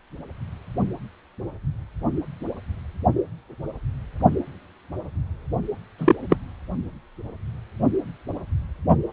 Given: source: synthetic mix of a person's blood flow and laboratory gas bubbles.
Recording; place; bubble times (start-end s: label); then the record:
Doppler ultrasound of blood flow; precordium
5.98-6.16 s: bubbles
6.29-6.36 s: bubbles
From the record:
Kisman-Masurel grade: 113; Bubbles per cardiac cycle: 1 to 2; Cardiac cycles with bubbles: 1 to 10%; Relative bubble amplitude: loud (0.450 to 0.775); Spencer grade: 1 (occasional bubble signal discernible with the cardiac motion signal, with majority of cardiac periods free of bubbles); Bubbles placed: only in the low amplitude regions of the cardiac cycle